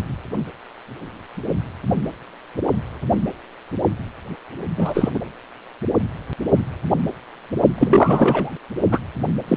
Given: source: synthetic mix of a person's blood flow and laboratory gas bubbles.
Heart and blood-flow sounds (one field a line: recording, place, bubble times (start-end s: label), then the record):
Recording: Doppler ultrasound of blood flow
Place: precordium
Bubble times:
4.76-5.08 s: bubbles
5.14-5.19 s: bubbles
7.78-8.52 s: bubbles
8.92-8.99 s: bubbles
9.47-9.57 s: bubbles
From the record:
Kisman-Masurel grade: 223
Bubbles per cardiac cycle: several, 3 to 8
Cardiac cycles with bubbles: 10 to 50%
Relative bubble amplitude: loud (0.450 to 0.775)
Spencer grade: 2 (many but less than half of the cardiac periods contain bubble signals, singularly or in groups)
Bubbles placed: only in the low amplitude regions of the cardiac cycle